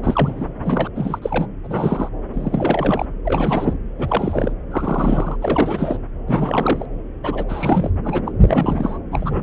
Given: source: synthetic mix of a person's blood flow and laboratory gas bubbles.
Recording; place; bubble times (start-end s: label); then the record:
Doppler ultrasound of blood flow; subclavian vein
0.03-0.53 s: bubbles
0.63-0.88 s: bubbles
0.96-1.19 s: bubbles
1.22-1.46 s: bubbles
1.64-2.08 s: bubbles
2.33-3.05 s: bubbles
3.25-3.73 s: bubbles
3.98-4.53 s: bubbles
4.71-5.36 s: bubbles
5.41-5.98 s: bubbles
6.27-6.86 s: bubbles
7.24-7.44 s: bubbles
7.49-7.91 s: bubbles
8.04-8.21 s: bubbles
8.26-8.31 s: bubbles
8.42-8.98 s: bubbles
9.12-9.43 s: bubbles
From the record:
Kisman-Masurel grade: 342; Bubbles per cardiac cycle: rolling drumbeat, 9 or more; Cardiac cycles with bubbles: 100%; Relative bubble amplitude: moderate (0.250 to 0.450); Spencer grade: 3 (all of the cardiac periods contain showers or single bubble signals, but not dominating or overriding the cardiac motion signals); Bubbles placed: anywhere in the cardiac cycle